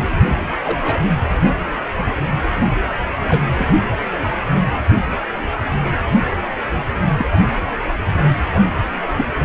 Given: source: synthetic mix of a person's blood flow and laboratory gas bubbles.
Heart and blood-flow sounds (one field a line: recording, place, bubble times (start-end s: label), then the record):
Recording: Doppler ultrasound of blood flow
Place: precordium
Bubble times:
0.65-1.00 s: bubbles
3.28-3.49 s: bubbles
3.55-3.67 s: bubbles
7.17-7.26 s: bubbles
9.17-9.26 s: bubbles
From the record:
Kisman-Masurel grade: 122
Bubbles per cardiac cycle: 1 to 2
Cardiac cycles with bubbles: 10 to 50%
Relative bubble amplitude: moderate (0.250 to 0.450)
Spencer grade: 2 (many but less than half of the cardiac periods contain bubble signals, singularly or in groups)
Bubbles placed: anywhere in the cardiac cycle